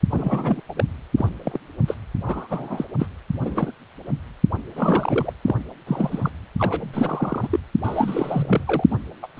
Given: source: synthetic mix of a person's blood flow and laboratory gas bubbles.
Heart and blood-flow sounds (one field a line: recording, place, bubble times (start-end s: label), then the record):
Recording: Doppler ultrasound of blood flow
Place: precordium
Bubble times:
0.10-0.60 s: bubbles
0.68-0.72 s: bubbles
0.76-0.84 s: bubbles
1.17-1.29 s: bubbles
1.45-1.59 s: bubbles
1.88-1.94 s: bubbles
2.23-2.85 s: bubbles
2.99-3.08 s: bubbles
3.40-3.72 s: bubbles
4.73-5.33 s: bubbles
5.45-5.55 s: bubbles
5.87-6.29 s: bubbles
6.59-7.60 s: bubbles
7.84-8.84 s: bubbles
8.90-8.96 s: bubbles
9.22-9.27 s: bubbles
9.37-9.40 s: bubbles
From the record:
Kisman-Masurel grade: 242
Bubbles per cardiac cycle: several, 3 to 8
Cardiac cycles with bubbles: 100%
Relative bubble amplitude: moderate (0.250 to 0.450)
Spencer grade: 3 (all of the cardiac periods contain showers or single bubble signals, but not dominating or overriding the cardiac motion signals)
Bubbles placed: anywhere in the cardiac cycle